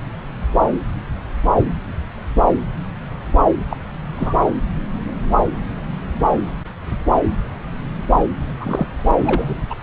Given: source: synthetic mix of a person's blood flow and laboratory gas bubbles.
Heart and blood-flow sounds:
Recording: Doppler ultrasound of blood flow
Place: subclavian vein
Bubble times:
3.69-3.77 s: bubbles
4.16-4.34 s: bubbles
8.59-8.86 s: bubbles
9.07-9.12 s: bubbles
9.19-9.64 s: bubbles
9.70-9.75 s: bubbles
From the record:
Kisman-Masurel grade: 222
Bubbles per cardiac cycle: several, 3 to 8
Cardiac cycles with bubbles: 10 to 50%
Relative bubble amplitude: moderate (0.250 to 0.450)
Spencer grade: 2 (many but less than half of the cardiac periods contain bubble signals, singularly or in groups)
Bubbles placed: anywhere in the cardiac cycle

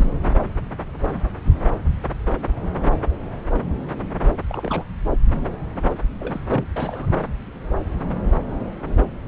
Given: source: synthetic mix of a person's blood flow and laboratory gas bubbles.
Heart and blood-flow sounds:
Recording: Doppler ultrasound of blood flow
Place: subclavian vein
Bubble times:
0.00-0.06 s: bubbles
4.48-4.84 s: bubbles
6.20-6.41 s: bubbles
6.49-6.64 s: bubbles
6.76-7.17 s: bubbles
From the record:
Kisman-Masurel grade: 221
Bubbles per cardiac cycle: several, 3 to 8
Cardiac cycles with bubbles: 10 to 50%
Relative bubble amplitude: barely perceptible (0.100 to 0.250)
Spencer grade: 2 (many but less than half of the cardiac periods contain bubble signals, singularly or in groups)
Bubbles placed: anywhere in the cardiac cycle

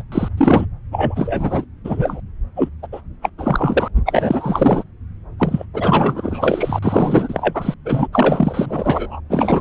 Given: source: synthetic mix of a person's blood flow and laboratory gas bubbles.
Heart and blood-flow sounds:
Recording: Doppler ultrasound of blood flow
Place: subclavian vein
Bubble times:
0.00-0.04 s: bubbles
0.11-0.29 s: bubbles
0.37-0.65 s: bubbles
0.91-1.65 s: bubbles
1.84-2.21 s: bubbles
2.56-2.69 s: bubbles
2.82-2.88 s: bubbles
2.92-3.01 s: bubbles
3.21-3.29 s: bubbles
3.38-3.88 s: bubbles
4.05-4.83 s: bubbles
5.38-5.66 s: bubbles
5.74-6.79 s: bubbles
6.83-7.74 s: bubbles
7.85-8.08 s: bubbles
8.12-9.21 s: bubbles
9.29-9.61 s: bubbles
From the record:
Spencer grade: 4 (maximum detectable bubble signal sounding continuously throughout systole and diastole of every cardiac period, and overriding the amplitude of the normal cardiac signals)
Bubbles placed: anywhere in the cardiac cycle

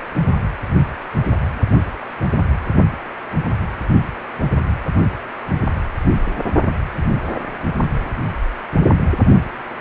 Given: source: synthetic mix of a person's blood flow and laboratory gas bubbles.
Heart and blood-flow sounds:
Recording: Doppler ultrasound of blood flow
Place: precordium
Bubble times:
7.33-7.38 s: bubbles
From the record:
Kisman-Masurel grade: 112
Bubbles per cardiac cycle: 1 to 2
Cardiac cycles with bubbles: 1 to 10%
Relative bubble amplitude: moderate (0.250 to 0.450)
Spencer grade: 1 (occasional bubble signal discernible with the cardiac motion signal, with majority of cardiac periods free of bubbles)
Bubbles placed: only in the low amplitude regions of the cardiac cycle

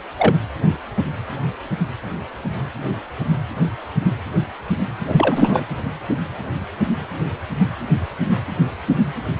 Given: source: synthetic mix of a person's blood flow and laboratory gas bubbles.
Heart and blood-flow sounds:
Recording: Doppler ultrasound of blood flow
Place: precordium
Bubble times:
0.17-0.35 s: bubbles
5.07-5.67 s: bubbles
From the record:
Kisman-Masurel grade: 223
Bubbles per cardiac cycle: several, 3 to 8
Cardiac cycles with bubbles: 10 to 50%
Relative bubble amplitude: loud (0.450 to 0.775)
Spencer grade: 2 (many but less than half of the cardiac periods contain bubble signals, singularly or in groups)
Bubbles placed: anywhere in the cardiac cycle

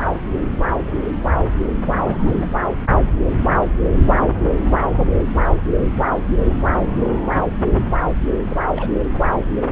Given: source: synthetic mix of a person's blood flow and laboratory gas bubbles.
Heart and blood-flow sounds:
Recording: Doppler ultrasound of blood flow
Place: subclavian vein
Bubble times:
1.85-2.46 s: bubbles
8.50-8.57 s: bubbles
8.76-8.91 s: bubbles
From the record:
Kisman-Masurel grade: 121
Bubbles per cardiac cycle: 1 to 2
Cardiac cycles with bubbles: 10 to 50%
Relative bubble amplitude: barely perceptible (0.100 to 0.250)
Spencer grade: 2 (many but less than half of the cardiac periods contain bubble signals, singularly or in groups)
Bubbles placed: anywhere in the cardiac cycle

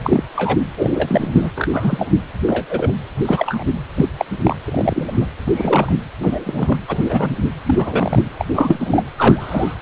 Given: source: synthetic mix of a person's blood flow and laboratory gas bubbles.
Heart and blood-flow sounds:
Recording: Doppler ultrasound of blood flow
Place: precordium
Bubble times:
0.04-0.23 s: bubbles
0.36-0.59 s: bubbles
0.77-1.50 s: bubbles
1.55-1.68 s: bubbles
1.72-2.07 s: bubbles
2.48-2.66 s: bubbles
2.70-2.92 s: bubbles
3.17-3.63 s: bubbles
3.95-4.07 s: bubbles
4.19-4.25 s: bubbles
4.43-4.57 s: bubbles
4.66-5.12 s: bubbles
5.20-5.27 s: bubbles
5.46-6.02 s: bubbles
6.17-6.78 s: bubbles
6.88-7.35 s: bubbles
7.66-8.28 s: bubbles
8.38-8.46 s: bubbles
8.54-9.05 s: bubbles
9.18-9.75 s: bubbles
From the record:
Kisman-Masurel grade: 243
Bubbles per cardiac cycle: several, 3 to 8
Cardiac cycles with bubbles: 100%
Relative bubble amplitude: loud (0.450 to 0.775)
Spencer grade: 3 (all of the cardiac periods contain showers or single bubble signals, but not dominating or overriding the cardiac motion signals)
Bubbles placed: anywhere in the cardiac cycle

